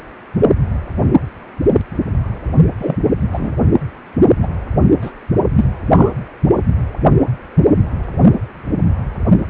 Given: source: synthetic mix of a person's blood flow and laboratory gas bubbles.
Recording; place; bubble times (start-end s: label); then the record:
Doppler ultrasound of blood flow; precordium
2.79-2.96 s: bubbles
3.32-3.52 s: bubbles
4.42-4.47 s: bubbles
5.01-5.12 s: bubbles
5.55-5.65 s: bubbles
5.93-6.11 s: bubbles
From the record:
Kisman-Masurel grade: 123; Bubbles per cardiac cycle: 1 to 2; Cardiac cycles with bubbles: 10 to 50%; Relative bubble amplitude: loud (0.450 to 0.775); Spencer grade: 2 (many but less than half of the cardiac periods contain bubble signals, singularly or in groups); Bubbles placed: only in the low amplitude regions of the cardiac cycle